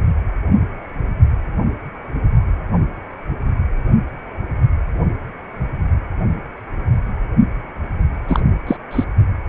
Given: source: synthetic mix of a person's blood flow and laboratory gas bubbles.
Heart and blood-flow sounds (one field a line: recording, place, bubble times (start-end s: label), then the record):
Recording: Doppler ultrasound of blood flow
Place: precordium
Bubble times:
8.28-8.41 s: bubbles
8.66-8.76 s: bubbles
8.91-9.04 s: bubbles
From the record:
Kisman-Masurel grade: 213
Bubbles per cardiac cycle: several, 3 to 8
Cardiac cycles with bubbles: 1 to 10%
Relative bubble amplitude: loud (0.450 to 0.775)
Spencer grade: 1 (occasional bubble signal discernible with the cardiac motion signal, with majority of cardiac periods free of bubbles)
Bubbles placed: anywhere in the cardiac cycle